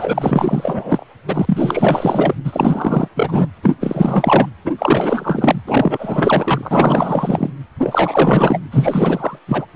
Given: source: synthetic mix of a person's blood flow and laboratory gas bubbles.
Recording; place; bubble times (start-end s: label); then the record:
Doppler ultrasound of blood flow; precordium
0.00-1.04 s: bubbles
1.27-2.35 s: bubbles
2.45-3.08 s: bubbles
3.15-3.48 s: bubbles
3.62-3.74 s: bubbles
3.81-4.48 s: bubbles
4.64-4.73 s: bubbles
4.78-5.62 s: bubbles
5.67-7.50 s: bubbles
7.79-8.59 s: bubbles
8.71-9.39 s: bubbles
9.47-9.66 s: bubbles
From the record:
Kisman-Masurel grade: 444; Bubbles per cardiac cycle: continuous sound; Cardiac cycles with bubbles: 100%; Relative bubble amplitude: maximal (0.775 to 0.999); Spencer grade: 4 (maximum detectable bubble signal sounding continuously throughout systole and diastole of every cardiac period, and overriding the amplitude of the normal cardiac signals); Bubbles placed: anywhere in the cardiac cycle